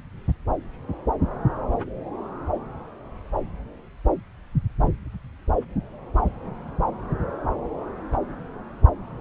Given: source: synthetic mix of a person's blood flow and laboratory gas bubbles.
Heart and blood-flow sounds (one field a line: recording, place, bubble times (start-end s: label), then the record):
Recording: Doppler ultrasound of blood flow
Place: subclavian vein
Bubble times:
no bubbles
From the record:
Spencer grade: 0 (complete lack of bubble signals)